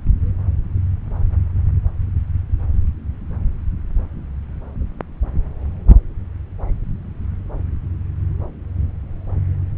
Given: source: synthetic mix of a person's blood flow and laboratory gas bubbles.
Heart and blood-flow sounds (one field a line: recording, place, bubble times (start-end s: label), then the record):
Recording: Doppler ultrasound of blood flow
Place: subclavian vein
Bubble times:
no bubbles
From the record:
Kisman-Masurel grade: 000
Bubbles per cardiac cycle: 0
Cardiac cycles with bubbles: 0%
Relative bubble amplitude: no bubbles discernible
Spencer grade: 0 (complete lack of bubble signals)